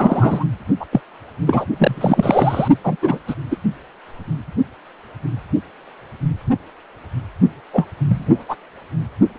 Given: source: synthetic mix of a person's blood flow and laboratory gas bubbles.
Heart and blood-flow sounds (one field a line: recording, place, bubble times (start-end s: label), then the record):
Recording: Doppler ultrasound of blood flow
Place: precordium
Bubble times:
0.00-0.45 s: bubbles
0.80-0.85 s: bubbles
0.92-1.01 s: bubbles
1.47-1.65 s: bubbles
1.79-2.68 s: bubbles
2.84-2.96 s: bubbles
3.02-3.18 s: bubbles
3.27-3.35 s: bubbles
3.51-3.56 s: bubbles
7.73-7.86 s: bubbles
8.09-8.44 s: bubbles
8.49-8.55 s: bubbles
From the record:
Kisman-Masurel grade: 223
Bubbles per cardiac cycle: several, 3 to 8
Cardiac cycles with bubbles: 10 to 50%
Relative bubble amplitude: loud (0.450 to 0.775)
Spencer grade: 2 (many but less than half of the cardiac periods contain bubble signals, singularly or in groups)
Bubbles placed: only in the low amplitude regions of the cardiac cycle